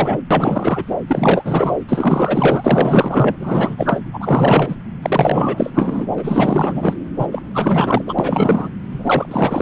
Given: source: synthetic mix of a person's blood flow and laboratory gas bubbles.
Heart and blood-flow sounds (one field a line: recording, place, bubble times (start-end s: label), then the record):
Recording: Doppler ultrasound of blood flow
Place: subclavian vein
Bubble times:
0.00-0.17 s: bubbles
0.30-0.84 s: bubbles
0.87-0.96 s: bubbles
1.07-1.78 s: bubbles
1.89-3.37 s: bubbles
3.39-4.01 s: bubbles
4.13-4.76 s: bubbles
5.02-5.71 s: bubbles
5.74-6.07 s: bubbles
6.10-6.96 s: bubbles
7.19-7.27 s: bubbles
7.31-7.42 s: bubbles
7.54-8.14 s: bubbles
8.19-8.69 s: bubbles
8.91-9.62 s: bubbles
From the record:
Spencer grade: 4 (maximum detectable bubble signal sounding continuously throughout systole and diastole of every cardiac period, and overriding the amplitude of the normal cardiac signals)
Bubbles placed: anywhere in the cardiac cycle